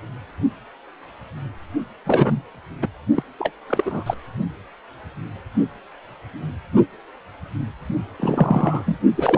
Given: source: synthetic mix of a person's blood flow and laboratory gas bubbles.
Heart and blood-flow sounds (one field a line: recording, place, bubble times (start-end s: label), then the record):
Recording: Doppler ultrasound of blood flow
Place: precordium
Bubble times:
2.05-2.42 s: bubbles
2.81-2.88 s: bubbles
3.15-3.23 s: bubbles
3.38-3.51 s: bubbles
3.67-4.14 s: bubbles
8.20-8.96 s: bubbles
9.14-9.38 s: bubbles
From the record:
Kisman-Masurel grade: 222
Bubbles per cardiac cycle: several, 3 to 8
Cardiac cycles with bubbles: 10 to 50%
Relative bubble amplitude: moderate (0.250 to 0.450)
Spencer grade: 2 (many but less than half of the cardiac periods contain bubble signals, singularly or in groups)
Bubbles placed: only in the low amplitude regions of the cardiac cycle